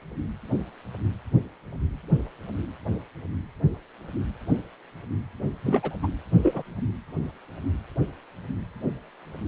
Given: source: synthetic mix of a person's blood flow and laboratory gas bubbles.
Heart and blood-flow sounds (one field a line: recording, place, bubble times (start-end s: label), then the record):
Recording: Doppler ultrasound of blood flow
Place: precordium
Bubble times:
5.62-5.96 s: bubbles
6.03-6.07 s: bubbles
6.43-6.62 s: bubbles
From the record:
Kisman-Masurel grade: 221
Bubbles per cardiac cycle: several, 3 to 8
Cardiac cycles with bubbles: 10 to 50%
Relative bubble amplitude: barely perceptible (0.100 to 0.250)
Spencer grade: 2 (many but less than half of the cardiac periods contain bubble signals, singularly or in groups)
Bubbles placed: only in the low amplitude regions of the cardiac cycle